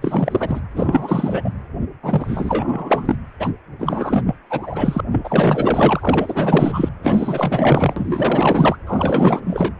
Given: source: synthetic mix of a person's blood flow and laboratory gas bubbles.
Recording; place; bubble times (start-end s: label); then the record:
Doppler ultrasound of blood flow; precordium
0.01-0.60 s: bubbles
0.76-1.50 s: bubbles
2.03-3.16 s: bubbles
3.39-3.52 s: bubbles
3.79-4.35 s: bubbles
4.50-5.00 s: bubbles
5.12-6.90 s: bubbles
7.03-8.77 s: bubbles
8.87-9.73 s: bubbles
From the record:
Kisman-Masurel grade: 444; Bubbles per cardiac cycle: continuous sound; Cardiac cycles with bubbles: 100%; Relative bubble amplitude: maximal (0.775 to 0.999); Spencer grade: 4 (maximum detectable bubble signal sounding continuously throughout systole and diastole of every cardiac period, and overriding the amplitude of the normal cardiac signals); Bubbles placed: anywhere in the cardiac cycle